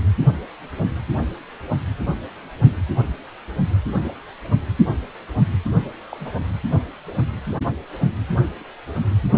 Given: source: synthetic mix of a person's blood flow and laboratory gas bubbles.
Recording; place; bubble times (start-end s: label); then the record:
Doppler ultrasound of blood flow; precordium
6.11-6.30 s: bubbles
From the record:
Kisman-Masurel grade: 111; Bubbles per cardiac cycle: 1 to 2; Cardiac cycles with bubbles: 1 to 10%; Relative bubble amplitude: barely perceptible (0.100 to 0.250); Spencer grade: 1 (occasional bubble signal discernible with the cardiac motion signal, with majority of cardiac periods free of bubbles); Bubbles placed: only in the low amplitude regions of the cardiac cycle